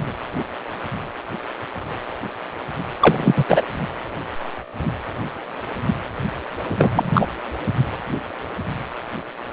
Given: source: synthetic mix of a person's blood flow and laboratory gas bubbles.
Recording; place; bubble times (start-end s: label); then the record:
Doppler ultrasound of blood flow; precordium
3.01-3.33 s: bubbles
3.36-3.44 s: bubbles
3.48-3.62 s: bubbles
6.70-6.75 s: bubbles
6.79-7.27 s: bubbles
From the record:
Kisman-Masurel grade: 223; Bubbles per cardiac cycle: several, 3 to 8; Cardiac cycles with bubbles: 10 to 50%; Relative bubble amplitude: loud (0.450 to 0.775); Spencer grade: 2 (many but less than half of the cardiac periods contain bubble signals, singularly or in groups); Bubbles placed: anywhere in the cardiac cycle